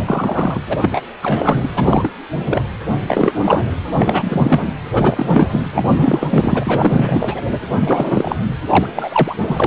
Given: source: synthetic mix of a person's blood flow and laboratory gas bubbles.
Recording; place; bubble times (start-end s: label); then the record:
Doppler ultrasound of blood flow; precordium
0.00-0.64 s: bubbles
0.68-0.78 s: bubbles
0.81-1.01 s: bubbles
1.23-1.69 s: bubbles
1.75-2.10 s: bubbles
2.45-2.62 s: bubbles
3.08-3.67 s: bubbles
3.85-4.68 s: bubbles
4.92-5.61 s: bubbles
5.72-6.28 s: bubbles
6.30-7.41 s: bubbles
7.79-8.38 s: bubbles
8.70-8.87 s: bubbles
8.95-9.35 s: bubbles
9.38-9.67 s: bubbles
From the record:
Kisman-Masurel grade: 333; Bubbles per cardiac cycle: rolling drumbeat, 9 or more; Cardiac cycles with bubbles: 50 to 99%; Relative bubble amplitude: loud (0.450 to 0.775); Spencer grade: 3 (all of the cardiac periods contain showers or single bubble signals, but not dominating or overriding the cardiac motion signals); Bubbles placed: anywhere in the cardiac cycle